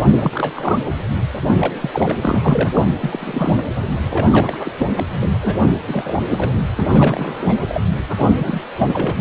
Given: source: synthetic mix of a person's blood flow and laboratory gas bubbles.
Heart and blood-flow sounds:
Doppler ultrasound of blood flow; precordium
0.19-0.79 s: bubbles
1.46-1.73 s: bubbles
1.81-1.90 s: bubbles
1.94-2.70 s: bubbles
2.73-2.81 s: bubbles
3.00-3.64 s: bubbles
4.10-4.27 s: bubbles
4.29-4.57 s: bubbles
4.59-4.73 s: bubbles
4.78-4.92 s: bubbles
4.97-5.04 s: bubbles
5.14-5.29 s: bubbles
5.41-5.60 s: bubbles
5.87-6.57 s: bubbles
6.75-7.57 s: bubbles
7.68-7.82 s: bubbles
8.19-8.62 s: bubbles
8.78-9.15 s: bubbles
From the record:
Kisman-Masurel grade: 342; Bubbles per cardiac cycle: rolling drumbeat, 9 or more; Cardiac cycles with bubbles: 100%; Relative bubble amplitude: moderate (0.250 to 0.450); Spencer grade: 3 (all of the cardiac periods contain showers or single bubble signals, but not dominating or overriding the cardiac motion signals); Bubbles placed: anywhere in the cardiac cycle

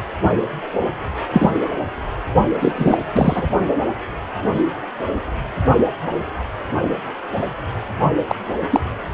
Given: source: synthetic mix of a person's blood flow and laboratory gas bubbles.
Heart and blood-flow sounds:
Doppler ultrasound of blood flow; precordium
1.33-1.50 s: bubbles
2.60-2.98 s: bubbles
3.15-3.50 s: bubbles
8.29-8.36 s: bubbles
8.71-8.82 s: bubbles
From the record:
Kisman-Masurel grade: 233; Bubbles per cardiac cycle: several, 3 to 8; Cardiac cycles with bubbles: 50 to 99%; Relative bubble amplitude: loud (0.450 to 0.775); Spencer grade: 3 (all of the cardiac periods contain showers or single bubble signals, but not dominating or overriding the cardiac motion signals); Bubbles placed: only in the low amplitude regions of the cardiac cycle

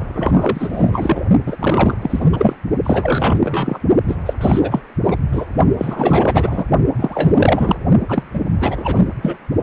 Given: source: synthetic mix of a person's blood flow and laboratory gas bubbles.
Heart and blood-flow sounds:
Doppler ultrasound of blood flow; precordium
0.00-1.21 s: bubbles
1.46-1.57 s: bubbles
1.59-1.94 s: bubbles
2.02-2.56 s: bubbles
2.83-3.39 s: bubbles
3.43-3.79 s: bubbles
4.08-4.16 s: bubbles
4.25-4.33 s: bubbles
4.41-4.83 s: bubbles
5.04-5.17 s: bubbles
5.32-5.46 s: bubbles
5.78-6.65 s: bubbles
6.97-7.76 s: bubbles
8.08-8.23 s: bubbles
8.33-8.40 s: bubbles
8.60-9.06 s: bubbles
9.22-9.37 s: bubbles
From the record:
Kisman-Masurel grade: 444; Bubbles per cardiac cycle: continuous sound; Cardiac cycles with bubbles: 100%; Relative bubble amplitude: maximal (0.775 to 0.999); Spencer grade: 4 (maximum detectable bubble signal sounding continuously throughout systole and diastole of every cardiac period, and overriding the amplitude of the normal cardiac signals); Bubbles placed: only in the low amplitude regions of the cardiac cycle

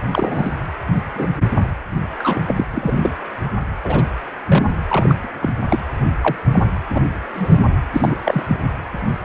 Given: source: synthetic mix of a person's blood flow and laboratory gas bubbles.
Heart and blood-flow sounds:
Doppler ultrasound of blood flow; precordium
0.12-0.54 s: bubbles
1.15-1.27 s: bubbles
2.19-2.40 s: bubbles
2.47-2.65 s: bubbles
2.71-3.13 s: bubbles
3.84-4.04 s: bubbles
4.46-5.15 s: bubbles
5.24-5.29 s: bubbles
5.41-5.50 s: bubbles
5.70-5.79 s: bubbles
6.22-6.36 s: bubbles
6.51-6.63 s: bubbles
6.95-7.01 s: bubbles
7.33-7.60 s: bubbles
7.95-8.16 s: bubbles
8.23-8.56 s: bubbles
From the record:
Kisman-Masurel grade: 242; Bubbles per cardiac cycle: several, 3 to 8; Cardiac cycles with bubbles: 100%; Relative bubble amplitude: moderate (0.250 to 0.450); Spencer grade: 3 (all of the cardiac periods contain showers or single bubble signals, but not dominating or overriding the cardiac motion signals); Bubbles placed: anywhere in the cardiac cycle

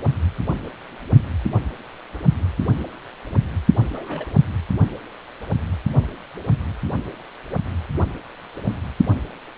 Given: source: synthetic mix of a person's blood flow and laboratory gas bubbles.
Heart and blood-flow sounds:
Doppler ultrasound of blood flow; precordium
3.91-4.25 s: bubbles
From the record:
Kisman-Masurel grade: 121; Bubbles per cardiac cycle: 1 to 2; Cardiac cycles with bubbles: 10 to 50%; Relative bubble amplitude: barely perceptible (0.100 to 0.250); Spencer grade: 2 (many but less than half of the cardiac periods contain bubble signals, singularly or in groups); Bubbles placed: only in the low amplitude regions of the cardiac cycle

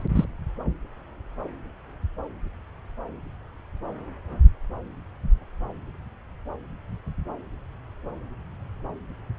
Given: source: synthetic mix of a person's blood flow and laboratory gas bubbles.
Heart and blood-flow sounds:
Doppler ultrasound of blood flow; subclavian vein
0.00-0.04 s: bubbles
0.15-0.24 s: bubbles
From the record:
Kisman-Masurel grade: 122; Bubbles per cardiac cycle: 1 to 2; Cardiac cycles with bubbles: 10 to 50%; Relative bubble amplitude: moderate (0.250 to 0.450); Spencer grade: 2 (many but less than half of the cardiac periods contain bubble signals, singularly or in groups); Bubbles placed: anywhere in the cardiac cycle

